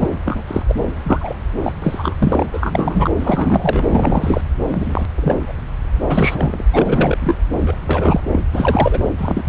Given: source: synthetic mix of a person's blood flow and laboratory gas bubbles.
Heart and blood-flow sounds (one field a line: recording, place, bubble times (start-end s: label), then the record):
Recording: Doppler ultrasound of blood flow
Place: subclavian vein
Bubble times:
0.00-0.08 s: bubbles
0.25-0.43 s: bubbles
0.47-0.62 s: bubbles
0.68-0.75 s: bubbles
1.03-1.35 s: bubbles
1.63-1.72 s: bubbles
1.82-2.46 s: bubbles
2.52-3.11 s: bubbles
3.19-3.84 s: bubbles
3.86-4.41 s: bubbles
4.68-5.06 s: bubbles
5.16-5.52 s: bubbles
6.07-6.63 s: bubbles
6.72-7.35 s: bubbles
7.60-7.77 s: bubbles
7.87-8.21 s: bubbles
8.32-8.39 s: bubbles
8.53-8.99 s: bubbles
9.17-9.43 s: bubbles
9.47-9.49 s: bubbles
From the record:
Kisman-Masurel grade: 243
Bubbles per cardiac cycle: several, 3 to 8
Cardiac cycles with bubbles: 100%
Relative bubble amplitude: loud (0.450 to 0.775)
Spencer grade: 3 (all of the cardiac periods contain showers or single bubble signals, but not dominating or overriding the cardiac motion signals)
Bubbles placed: anywhere in the cardiac cycle